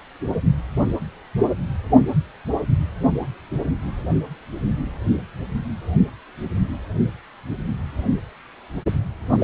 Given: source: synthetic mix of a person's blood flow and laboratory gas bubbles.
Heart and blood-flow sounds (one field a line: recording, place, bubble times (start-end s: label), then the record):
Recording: Doppler ultrasound of blood flow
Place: precordium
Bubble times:
9.38-9.44 s: bubbles
From the record:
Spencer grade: 1 (occasional bubble signal discernible with the cardiac motion signal, with majority of cardiac periods free of bubbles)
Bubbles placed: only in the low amplitude regions of the cardiac cycle